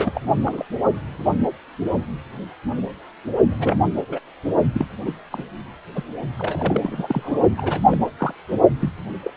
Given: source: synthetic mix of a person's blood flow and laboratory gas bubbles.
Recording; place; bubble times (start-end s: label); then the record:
Doppler ultrasound of blood flow; precordium
0.00-0.21 s: bubbles
0.46-0.66 s: bubbles
3.51-3.90 s: bubbles
4.08-4.19 s: bubbles
4.74-4.86 s: bubbles
5.05-5.12 s: bubbles
5.30-5.45 s: bubbles
5.95-6.04 s: bubbles
6.37-6.80 s: bubbles
6.83-7.40 s: bubbles
7.57-7.79 s: bubbles
7.91-7.96 s: bubbles
8.18-8.33 s: bubbles
8.79-8.90 s: bubbles
9.25-9.30 s: bubbles
From the record:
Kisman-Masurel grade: 232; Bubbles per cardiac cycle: several, 3 to 8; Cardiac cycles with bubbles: 50 to 99%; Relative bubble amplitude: moderate (0.250 to 0.450); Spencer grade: 3 (all of the cardiac periods contain showers or single bubble signals, but not dominating or overriding the cardiac motion signals); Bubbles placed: only in the low amplitude regions of the cardiac cycle